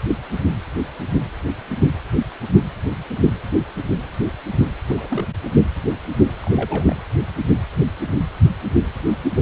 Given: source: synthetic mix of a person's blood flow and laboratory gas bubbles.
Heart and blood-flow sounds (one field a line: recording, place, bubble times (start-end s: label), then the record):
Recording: Doppler ultrasound of blood flow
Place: precordium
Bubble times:
4.89-5.26 s: bubbles
6.42-6.96 s: bubbles
From the record:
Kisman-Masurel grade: 221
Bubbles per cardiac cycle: several, 3 to 8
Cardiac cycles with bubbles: 10 to 50%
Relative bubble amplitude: barely perceptible (0.100 to 0.250)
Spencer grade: 2 (many but less than half of the cardiac periods contain bubble signals, singularly or in groups)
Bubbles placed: anywhere in the cardiac cycle